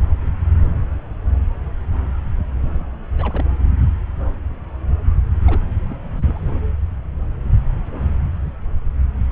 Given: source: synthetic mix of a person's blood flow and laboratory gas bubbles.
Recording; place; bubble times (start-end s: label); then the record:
Doppler ultrasound of blood flow; subclavian vein
2.58-2.97 s: bubbles
3.18-3.44 s: bubbles
5.45-5.63 s: bubbles
5.85-5.96 s: bubbles
6.16-6.60 s: bubbles
9.30-9.32 s: bubbles
From the record:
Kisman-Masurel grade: 221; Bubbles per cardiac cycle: several, 3 to 8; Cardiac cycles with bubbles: 10 to 50%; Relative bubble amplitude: barely perceptible (0.100 to 0.250); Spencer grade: 2 (many but less than half of the cardiac periods contain bubble signals, singularly or in groups); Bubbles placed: anywhere in the cardiac cycle